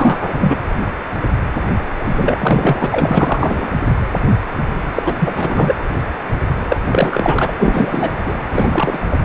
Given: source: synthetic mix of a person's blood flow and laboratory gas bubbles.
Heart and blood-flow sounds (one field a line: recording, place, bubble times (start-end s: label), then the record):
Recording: Doppler ultrasound of blood flow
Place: precordium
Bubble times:
0.00-0.58 s: bubbles
2.04-2.87 s: bubbles
2.90-3.67 s: bubbles
4.93-5.02 s: bubbles
5.05-5.15 s: bubbles
5.18-5.73 s: bubbles
6.68-6.76 s: bubbles
6.91-7.54 s: bubbles
7.59-8.12 s: bubbles
8.23-8.33 s: bubbles
8.51-9.00 s: bubbles
9.11-9.17 s: bubbles
From the record:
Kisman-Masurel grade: 333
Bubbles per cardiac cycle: rolling drumbeat, 9 or more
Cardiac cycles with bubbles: 50 to 99%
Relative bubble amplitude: loud (0.450 to 0.775)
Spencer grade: 3 (all of the cardiac periods contain showers or single bubble signals, but not dominating or overriding the cardiac motion signals)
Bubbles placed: anywhere in the cardiac cycle